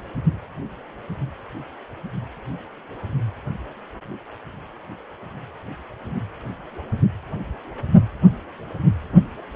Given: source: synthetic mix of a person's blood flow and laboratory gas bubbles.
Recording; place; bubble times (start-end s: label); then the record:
Doppler ultrasound of blood flow; precordium
no bubbles
From the record:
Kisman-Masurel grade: 000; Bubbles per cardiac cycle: 0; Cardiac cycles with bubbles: 0%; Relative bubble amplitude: no bubbles discernible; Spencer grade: 0 (complete lack of bubble signals)